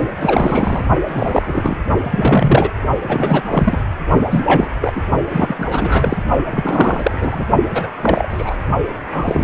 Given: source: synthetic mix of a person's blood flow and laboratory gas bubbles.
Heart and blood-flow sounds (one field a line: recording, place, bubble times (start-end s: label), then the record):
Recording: Doppler ultrasound of blood flow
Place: precordium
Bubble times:
0.20-0.86 s: bubbles
1.07-1.77 s: bubbles
2.04-2.70 s: bubbles
3.02-3.42 s: bubbles
3.50-3.79 s: bubbles
4.30-4.69 s: bubbles
4.81-4.92 s: bubbles
4.95-5.02 s: bubbles
5.29-6.17 s: bubbles
6.50-7.46 s: bubbles
7.71-7.88 s: bubbles
7.99-8.56 s: bubbles
9.12-9.44 s: bubbles
From the record:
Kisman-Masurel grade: 343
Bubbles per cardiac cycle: rolling drumbeat, 9 or more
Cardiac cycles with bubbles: 100%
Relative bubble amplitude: loud (0.450 to 0.775)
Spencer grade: 3 (all of the cardiac periods contain showers or single bubble signals, but not dominating or overriding the cardiac motion signals)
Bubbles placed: only in the low amplitude regions of the cardiac cycle